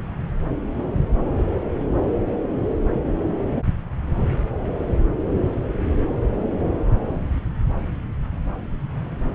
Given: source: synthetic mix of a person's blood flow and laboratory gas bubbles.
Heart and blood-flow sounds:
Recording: Doppler ultrasound of blood flow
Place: subclavian vein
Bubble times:
no bubbles
From the record:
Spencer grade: 0 (complete lack of bubble signals)

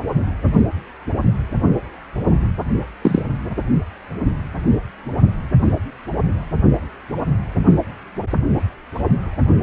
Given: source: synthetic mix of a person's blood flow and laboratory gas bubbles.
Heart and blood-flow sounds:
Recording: Doppler ultrasound of blood flow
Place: precordium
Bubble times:
3.02-3.22 s: bubbles
From the record:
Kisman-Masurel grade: 113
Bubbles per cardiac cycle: 1 to 2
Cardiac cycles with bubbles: 1 to 10%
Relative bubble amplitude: loud (0.450 to 0.775)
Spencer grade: 1 (occasional bubble signal discernible with the cardiac motion signal, with majority of cardiac periods free of bubbles)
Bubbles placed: only in the low amplitude regions of the cardiac cycle

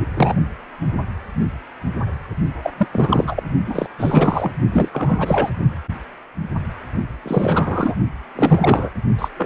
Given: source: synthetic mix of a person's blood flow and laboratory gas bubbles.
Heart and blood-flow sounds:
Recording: Doppler ultrasound of blood flow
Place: precordium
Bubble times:
0.00-0.06 s: bubbles
0.14-0.35 s: bubbles
2.62-2.71 s: bubbles
2.78-2.88 s: bubbles
2.92-3.43 s: bubbles
3.66-3.86 s: bubbles
3.98-4.52 s: bubbles
4.72-4.89 s: bubbles
4.92-5.50 s: bubbles
7.22-7.96 s: bubbles
8.35-8.92 s: bubbles
9.18-9.29 s: bubbles
9.37-9.46 s: bubbles
From the record:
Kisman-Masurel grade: 333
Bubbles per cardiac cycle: rolling drumbeat, 9 or more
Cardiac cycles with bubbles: 50 to 99%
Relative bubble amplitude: loud (0.450 to 0.775)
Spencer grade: 3 (all of the cardiac periods contain showers or single bubble signals, but not dominating or overriding the cardiac motion signals)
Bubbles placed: only in the low amplitude regions of the cardiac cycle

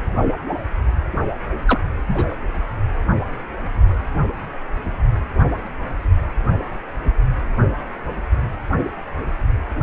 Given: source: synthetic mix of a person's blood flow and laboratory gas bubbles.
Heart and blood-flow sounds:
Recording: Doppler ultrasound of blood flow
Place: precordium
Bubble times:
1.66-1.80 s: bubbles
2.08-2.35 s: bubbles
From the record:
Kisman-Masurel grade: 212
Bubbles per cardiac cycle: several, 3 to 8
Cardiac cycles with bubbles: 1 to 10%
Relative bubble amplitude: moderate (0.250 to 0.450)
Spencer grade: 1 (occasional bubble signal discernible with the cardiac motion signal, with majority of cardiac periods free of bubbles)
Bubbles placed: anywhere in the cardiac cycle

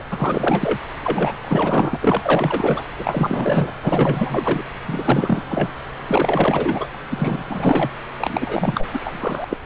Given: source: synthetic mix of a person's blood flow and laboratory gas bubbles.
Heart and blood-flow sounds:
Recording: Doppler ultrasound of blood flow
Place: subclavian vein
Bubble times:
0.00-0.02 s: bubbles
0.10-0.79 s: bubbles
1.03-1.97 s: bubbles
2.01-2.83 s: bubbles
2.98-3.71 s: bubbles
3.83-4.63 s: bubbles
4.87-5.72 s: bubbles
6.07-6.88 s: bubbles
6.95-6.98 s: bubbles
7.10-7.44 s: bubbles
7.49-7.90 s: bubbles
8.18-8.87 s: bubbles
8.93-9.45 s: bubbles
9.50-9.57 s: bubbles
From the record:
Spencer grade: 4 (maximum detectable bubble signal sounding continuously throughout systole and diastole of every cardiac period, and overriding the amplitude of the normal cardiac signals)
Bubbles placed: anywhere in the cardiac cycle

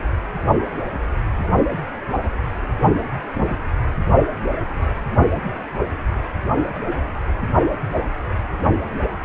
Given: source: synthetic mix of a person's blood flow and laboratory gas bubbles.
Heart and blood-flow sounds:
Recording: Doppler ultrasound of blood flow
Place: precordium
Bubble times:
3.33-3.57 s: bubbles
From the record:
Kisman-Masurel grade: 111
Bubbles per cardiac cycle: 1 to 2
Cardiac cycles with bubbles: 1 to 10%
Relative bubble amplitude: barely perceptible (0.100 to 0.250)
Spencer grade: 1 (occasional bubble signal discernible with the cardiac motion signal, with majority of cardiac periods free of bubbles)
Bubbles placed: only in the low amplitude regions of the cardiac cycle

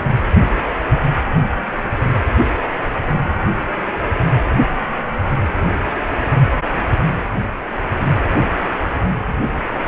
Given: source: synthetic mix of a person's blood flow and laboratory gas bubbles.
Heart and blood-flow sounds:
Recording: Doppler ultrasound of blood flow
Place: precordium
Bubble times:
no bubbles
From the record:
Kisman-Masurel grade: 000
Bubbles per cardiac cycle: 0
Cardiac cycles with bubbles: 0%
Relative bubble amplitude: no bubbles discernible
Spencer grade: 0 (complete lack of bubble signals)

